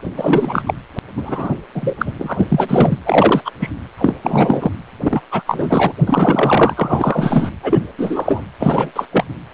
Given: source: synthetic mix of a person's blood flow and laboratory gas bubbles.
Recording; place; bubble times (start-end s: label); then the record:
Doppler ultrasound of blood flow; precordium
0.17-0.73 s: bubbles
1.15-1.54 s: bubbles
1.74-2.12 s: bubbles
2.19-2.97 s: bubbles
3.04-3.42 s: bubbles
3.45-3.51 s: bubbles
3.60-3.70 s: bubbles
3.98-4.14 s: bubbles
4.22-4.71 s: bubbles
5.02-5.21 s: bubbles
5.31-5.42 s: bubbles
5.46-5.93 s: bubbles
6.06-7.50 s: bubbles
7.62-7.82 s: bubbles
7.98-8.45 s: bubbles
8.60-8.91 s: bubbles
8.96-9.05 s: bubbles
9.12-9.25 s: bubbles
From the record:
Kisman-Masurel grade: 343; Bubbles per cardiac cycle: rolling drumbeat, 9 or more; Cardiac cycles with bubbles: 100%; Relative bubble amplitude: loud (0.450 to 0.775); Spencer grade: 3 (all of the cardiac periods contain showers or single bubble signals, but not dominating or overriding the cardiac motion signals); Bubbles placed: anywhere in the cardiac cycle